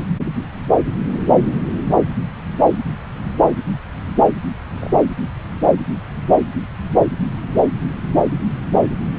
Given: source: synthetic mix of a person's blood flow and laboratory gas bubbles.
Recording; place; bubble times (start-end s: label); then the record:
Doppler ultrasound of blood flow; subclavian vein
4.75-5.02 s: bubbles
From the record:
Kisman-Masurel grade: 111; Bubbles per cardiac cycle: 1 to 2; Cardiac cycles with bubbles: 1 to 10%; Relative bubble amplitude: barely perceptible (0.100 to 0.250); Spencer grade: 1 (occasional bubble signal discernible with the cardiac motion signal, with majority of cardiac periods free of bubbles); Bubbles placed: anywhere in the cardiac cycle